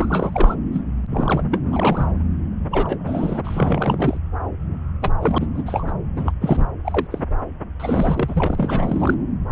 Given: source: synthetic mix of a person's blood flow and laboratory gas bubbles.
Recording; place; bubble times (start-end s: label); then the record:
Doppler ultrasound of blood flow; subclavian vein
0.00-0.55 s: bubbles
0.73-0.81 s: bubbles
1.10-1.44 s: bubbles
1.51-1.59 s: bubbles
1.71-2.12 s: bubbles
2.70-3.40 s: bubbles
3.44-4.17 s: bubbles
5.01-5.10 s: bubbles
5.21-5.46 s: bubbles
5.54-5.63 s: bubbles
5.66-5.92 s: bubbles
6.15-6.32 s: bubbles
6.41-6.67 s: bubbles
6.84-7.07 s: bubbles
7.10-7.24 s: bubbles
7.79-9.14 s: bubbles
From the record:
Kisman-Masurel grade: 242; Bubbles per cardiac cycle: several, 3 to 8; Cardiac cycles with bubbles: 100%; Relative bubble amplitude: moderate (0.250 to 0.450); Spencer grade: 3 (all of the cardiac periods contain showers or single bubble signals, but not dominating or overriding the cardiac motion signals); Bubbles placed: anywhere in the cardiac cycle